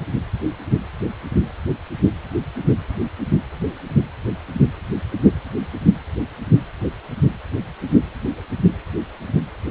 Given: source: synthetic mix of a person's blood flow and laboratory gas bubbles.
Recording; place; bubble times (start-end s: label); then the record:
Doppler ultrasound of blood flow; precordium
no bubbles
From the record:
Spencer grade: 0 (complete lack of bubble signals)